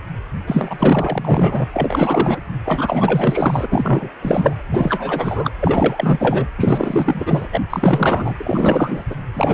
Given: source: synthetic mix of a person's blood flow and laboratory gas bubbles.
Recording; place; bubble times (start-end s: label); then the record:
Doppler ultrasound of blood flow; precordium
0.47-1.64 s: bubbles
1.72-2.41 s: bubbles
2.65-3.68 s: bubbles
3.72-4.10 s: bubbles
4.21-4.63 s: bubbles
4.67-5.51 s: bubbles
5.59-6.47 s: bubbles
6.57-7.48 s: bubbles
7.52-7.61 s: bubbles
7.69-9.04 s: bubbles
9.09-9.15 s: bubbles
9.34-9.54 s: bubbles
From the record:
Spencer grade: 4 (maximum detectable bubble signal sounding continuously throughout systole and diastole of every cardiac period, and overriding the amplitude of the normal cardiac signals); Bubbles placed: anywhere in the cardiac cycle